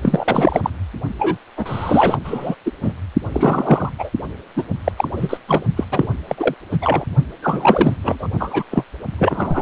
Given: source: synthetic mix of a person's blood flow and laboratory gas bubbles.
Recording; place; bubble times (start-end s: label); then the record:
Doppler ultrasound of blood flow; precordium
0.02-0.60 s: bubbles
0.63-0.70 s: bubbles
1.19-1.38 s: bubbles
1.56-2.18 s: bubbles
2.25-2.55 s: bubbles
2.66-2.71 s: bubbles
2.83-2.93 s: bubbles
3.32-3.90 s: bubbles
3.98-4.09 s: bubbles
4.56-4.63 s: bubbles
4.84-4.92 s: bubbles
4.96-5.08 s: bubbles
5.17-5.38 s: bubbles
5.47-5.64 s: bubbles
5.76-5.85 s: bubbles
5.91-6.08 s: bubbles
6.27-6.54 s: bubbles
6.71-6.79 s: bubbles
6.81-7.05 s: bubbles
7.42-7.95 s: bubbles
8.02-8.29 s: bubbles
8.40-8.63 s: bubbles
8.71-8.84 s: bubbles
9.18-9.62 s: bubbles
From the record:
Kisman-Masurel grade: 343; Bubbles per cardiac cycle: rolling drumbeat, 9 or more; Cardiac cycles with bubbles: 100%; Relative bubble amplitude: loud (0.450 to 0.775); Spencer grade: 3 (all of the cardiac periods contain showers or single bubble signals, but not dominating or overriding the cardiac motion signals); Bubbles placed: only in the low amplitude regions of the cardiac cycle